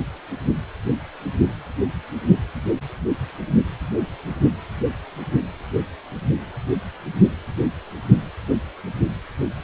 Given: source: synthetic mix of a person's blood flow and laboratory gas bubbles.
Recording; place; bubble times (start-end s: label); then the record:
Doppler ultrasound of blood flow; precordium
no bubbles
From the record:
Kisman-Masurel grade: 000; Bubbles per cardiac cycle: 0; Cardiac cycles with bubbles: 0%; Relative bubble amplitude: no bubbles discernible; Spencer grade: 0 (complete lack of bubble signals)